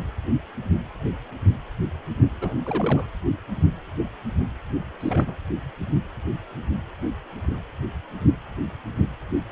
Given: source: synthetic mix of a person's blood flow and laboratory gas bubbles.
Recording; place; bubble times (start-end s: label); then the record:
Doppler ultrasound of blood flow; precordium
2.41-2.56 s: bubbles
2.65-3.07 s: bubbles
5.00-5.35 s: bubbles
From the record:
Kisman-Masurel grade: 211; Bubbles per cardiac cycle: several, 3 to 8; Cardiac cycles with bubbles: 1 to 10%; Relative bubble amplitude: barely perceptible (0.100 to 0.250); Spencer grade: 1 (occasional bubble signal discernible with the cardiac motion signal, with majority of cardiac periods free of bubbles); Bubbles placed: anywhere in the cardiac cycle